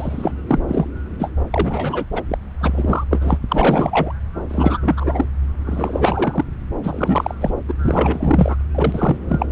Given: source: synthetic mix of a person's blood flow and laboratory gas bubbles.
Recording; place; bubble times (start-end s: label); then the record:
Doppler ultrasound of blood flow; subclavian vein
0.00-0.33 s: bubbles
0.47-0.59 s: bubbles
0.68-0.87 s: bubbles
1.19-1.30 s: bubbles
1.50-2.05 s: bubbles
2.12-2.23 s: bubbles
2.29-2.38 s: bubbles
2.60-3.04 s: bubbles
3.10-3.38 s: bubbles
3.49-4.13 s: bubbles
4.49-4.78 s: bubbles
4.82-5.25 s: bubbles
5.66-6.45 s: bubbles
6.83-7.34 s: bubbles
7.41-7.50 s: bubbles
7.68-7.74 s: bubbles
7.80-8.55 s: bubbles
8.74-9.16 s: bubbles
9.27-9.46 s: bubbles
From the record:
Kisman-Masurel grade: 333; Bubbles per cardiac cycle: rolling drumbeat, 9 or more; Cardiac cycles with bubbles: 50 to 99%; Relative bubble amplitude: loud (0.450 to 0.775); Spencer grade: 3 (all of the cardiac periods contain showers or single bubble signals, but not dominating or overriding the cardiac motion signals); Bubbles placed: anywhere in the cardiac cycle